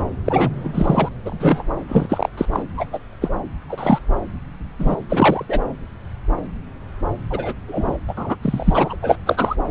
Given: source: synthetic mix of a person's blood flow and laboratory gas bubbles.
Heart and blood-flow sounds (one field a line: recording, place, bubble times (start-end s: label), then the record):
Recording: Doppler ultrasound of blood flow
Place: subclavian vein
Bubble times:
0.25-0.51 s: bubbles
0.59-1.09 s: bubbles
1.25-1.64 s: bubbles
1.88-2.29 s: bubbles
2.37-2.46 s: bubbles
2.52-2.62 s: bubbles
2.77-2.86 s: bubbles
2.93-3.00 s: bubbles
3.21-3.30 s: bubbles
3.69-3.98 s: bubbles
4.79-4.96 s: bubbles
5.09-5.45 s: bubbles
5.48-5.60 s: bubbles
7.30-7.53 s: bubbles
7.68-7.97 s: bubbles
8.07-8.14 s: bubbles
8.17-8.36 s: bubbles
8.42-8.96 s: bubbles
9.02-9.17 s: bubbles
9.25-9.55 s: bubbles
From the record:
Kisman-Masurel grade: 233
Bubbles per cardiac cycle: several, 3 to 8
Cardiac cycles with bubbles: 50 to 99%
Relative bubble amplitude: loud (0.450 to 0.775)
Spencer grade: 3 (all of the cardiac periods contain showers or single bubble signals, but not dominating or overriding the cardiac motion signals)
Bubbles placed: anywhere in the cardiac cycle